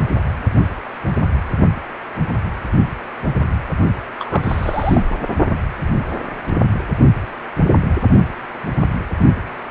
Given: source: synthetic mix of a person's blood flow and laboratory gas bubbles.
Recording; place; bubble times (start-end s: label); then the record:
Doppler ultrasound of blood flow; precordium
4.19-5.05 s: bubbles
5.10-5.17 s: bubbles
From the record:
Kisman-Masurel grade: 212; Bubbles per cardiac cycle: several, 3 to 8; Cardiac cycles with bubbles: 1 to 10%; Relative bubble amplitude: moderate (0.250 to 0.450); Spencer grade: 1 (occasional bubble signal discernible with the cardiac motion signal, with majority of cardiac periods free of bubbles); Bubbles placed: only in the low amplitude regions of the cardiac cycle